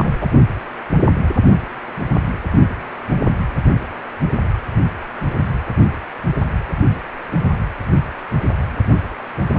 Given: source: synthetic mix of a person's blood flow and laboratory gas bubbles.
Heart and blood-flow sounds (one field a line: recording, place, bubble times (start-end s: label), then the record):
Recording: Doppler ultrasound of blood flow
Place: precordium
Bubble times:
0.00-0.11 s: bubbles
0.21-0.27 s: bubbles
From the record:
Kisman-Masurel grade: 213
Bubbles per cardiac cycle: several, 3 to 8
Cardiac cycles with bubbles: 1 to 10%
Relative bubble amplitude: loud (0.450 to 0.775)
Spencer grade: 1 (occasional bubble signal discernible with the cardiac motion signal, with majority of cardiac periods free of bubbles)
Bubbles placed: anywhere in the cardiac cycle